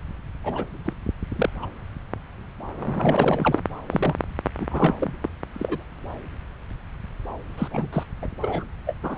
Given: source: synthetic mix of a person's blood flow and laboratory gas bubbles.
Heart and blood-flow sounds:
Doppler ultrasound of blood flow; subclavian vein
0.44-0.65 s: bubbles
0.84-0.93 s: bubbles
1.35-1.49 s: bubbles
1.61-1.66 s: bubbles
2.80-3.60 s: bubbles
3.90-4.16 s: bubbles
4.60-4.67 s: bubbles
4.71-4.95 s: bubbles
5.01-5.15 s: bubbles
5.21-5.29 s: bubbles
5.54-5.83 s: bubbles
7.58-7.68 s: bubbles
7.71-7.89 s: bubbles
7.92-8.04 s: bubbles
8.22-8.27 s: bubbles
8.42-8.64 s: bubbles
8.86-8.94 s: bubbles
9.03-9.17 s: bubbles
From the record:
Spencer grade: 3 (all of the cardiac periods contain showers or single bubble signals, but not dominating or overriding the cardiac motion signals); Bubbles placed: anywhere in the cardiac cycle

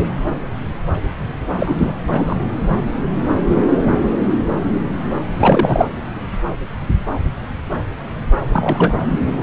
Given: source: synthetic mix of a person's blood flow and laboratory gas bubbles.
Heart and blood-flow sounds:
Doppler ultrasound of blood flow; subclavian vein
0.00-0.07 s: bubbles
1.57-1.93 s: bubbles
2.08-2.36 s: bubbles
5.39-5.85 s: bubbles
8.53-8.94 s: bubbles
From the record:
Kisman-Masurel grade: 223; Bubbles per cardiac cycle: several, 3 to 8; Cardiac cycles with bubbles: 10 to 50%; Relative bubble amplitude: loud (0.450 to 0.775); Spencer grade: 2 (many but less than half of the cardiac periods contain bubble signals, singularly or in groups); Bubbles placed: anywhere in the cardiac cycle

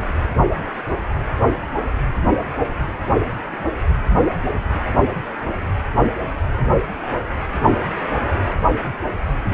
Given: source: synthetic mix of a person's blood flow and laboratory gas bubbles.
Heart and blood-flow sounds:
Doppler ultrasound of blood flow; precordium
no bubbles
From the record:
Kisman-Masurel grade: 000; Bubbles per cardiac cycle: 0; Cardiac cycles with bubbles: 0%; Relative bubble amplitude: no bubbles discernible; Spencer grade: 0 (complete lack of bubble signals)

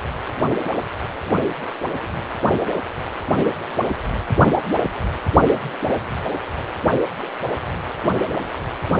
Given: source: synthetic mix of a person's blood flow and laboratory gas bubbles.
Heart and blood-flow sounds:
Doppler ultrasound of blood flow; precordium
8.22-8.49 s: bubbles
8.53-8.57 s: bubbles
From the record:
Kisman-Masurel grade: 211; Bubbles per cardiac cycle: several, 3 to 8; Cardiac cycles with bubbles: 1 to 10%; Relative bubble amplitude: barely perceptible (0.100 to 0.250); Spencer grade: 1 (occasional bubble signal discernible with the cardiac motion signal, with majority of cardiac periods free of bubbles); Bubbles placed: only in the low amplitude regions of the cardiac cycle

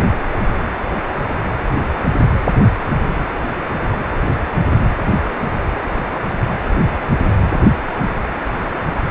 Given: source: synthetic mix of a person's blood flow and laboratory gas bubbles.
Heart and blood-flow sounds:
Doppler ultrasound of blood flow; precordium
no bubbles
From the record:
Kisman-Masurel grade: 000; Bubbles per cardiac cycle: 0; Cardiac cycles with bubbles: 0%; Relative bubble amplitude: no bubbles discernible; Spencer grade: 0 (complete lack of bubble signals)

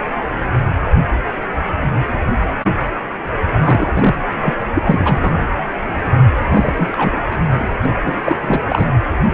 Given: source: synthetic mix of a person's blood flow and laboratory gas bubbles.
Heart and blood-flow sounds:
Doppler ultrasound of blood flow; precordium
3.63-4.15 s: bubbles
4.42-4.53 s: bubbles
4.74-5.31 s: bubbles
6.51-6.74 s: bubbles
6.77-7.12 s: bubbles
7.30-7.37 s: bubbles
7.60-7.68 s: bubbles
7.85-7.89 s: bubbles
8.05-8.14 s: bubbles
8.24-8.38 s: bubbles
8.41-8.60 s: bubbles
8.68-8.86 s: bubbles
From the record:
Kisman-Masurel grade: 223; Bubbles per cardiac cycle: several, 3 to 8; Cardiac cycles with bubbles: 10 to 50%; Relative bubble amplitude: loud (0.450 to 0.775); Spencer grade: 2 (many but less than half of the cardiac periods contain bubble signals, singularly or in groups); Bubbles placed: anywhere in the cardiac cycle

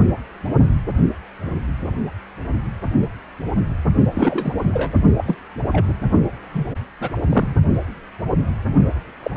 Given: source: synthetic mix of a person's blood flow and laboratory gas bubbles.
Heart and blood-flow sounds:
Doppler ultrasound of blood flow; precordium
4.14-4.57 s: bubbles
4.73-4.92 s: bubbles
5.17-5.24 s: bubbles
5.26-5.36 s: bubbles
5.72-5.96 s: bubbles
6.51-6.68 s: bubbles
7.00-7.10 s: bubbles
7.20-7.55 s: bubbles
9.22-9.31 s: bubbles
9.34-9.37 s: bubbles
From the record:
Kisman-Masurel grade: 232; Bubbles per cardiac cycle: several, 3 to 8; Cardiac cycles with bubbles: 50 to 99%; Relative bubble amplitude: moderate (0.250 to 0.450); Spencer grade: 3 (all of the cardiac periods contain showers or single bubble signals, but not dominating or overriding the cardiac motion signals); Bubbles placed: only in the low amplitude regions of the cardiac cycle

